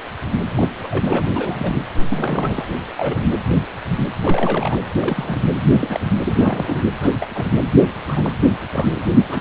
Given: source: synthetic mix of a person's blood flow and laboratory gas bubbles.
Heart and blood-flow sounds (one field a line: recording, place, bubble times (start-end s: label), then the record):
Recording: Doppler ultrasound of blood flow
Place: precordium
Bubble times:
0.57-0.69 s: bubbles
0.84-1.25 s: bubbles
1.34-1.82 s: bubbles
2.09-2.65 s: bubbles
2.96-3.27 s: bubbles
4.21-4.80 s: bubbles
4.99-5.37 s: bubbles
5.80-6.00 s: bubbles
6.25-6.86 s: bubbles
7.01-7.27 s: bubbles
7.35-7.46 s: bubbles
8.08-8.30 s: bubbles
8.72-9.11 s: bubbles
9.18-9.41 s: bubbles
From the record:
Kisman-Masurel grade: 232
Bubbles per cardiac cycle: several, 3 to 8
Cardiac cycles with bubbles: 50 to 99%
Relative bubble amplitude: moderate (0.250 to 0.450)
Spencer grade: 3 (all of the cardiac periods contain showers or single bubble signals, but not dominating or overriding the cardiac motion signals)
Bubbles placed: anywhere in the cardiac cycle